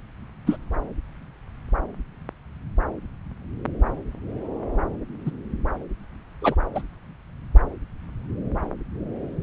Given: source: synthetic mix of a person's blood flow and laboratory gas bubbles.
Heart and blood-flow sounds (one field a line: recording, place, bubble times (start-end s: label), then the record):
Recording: Doppler ultrasound of blood flow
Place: subclavian vein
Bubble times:
0.47-0.57 s: bubbles
5.25-5.31 s: bubbles
6.42-6.55 s: bubbles
6.75-6.82 s: bubbles
From the record:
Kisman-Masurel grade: 123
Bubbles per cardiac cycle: 1 to 2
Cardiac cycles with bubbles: 10 to 50%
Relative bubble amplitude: loud (0.450 to 0.775)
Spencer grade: 2 (many but less than half of the cardiac periods contain bubble signals, singularly or in groups)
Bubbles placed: anywhere in the cardiac cycle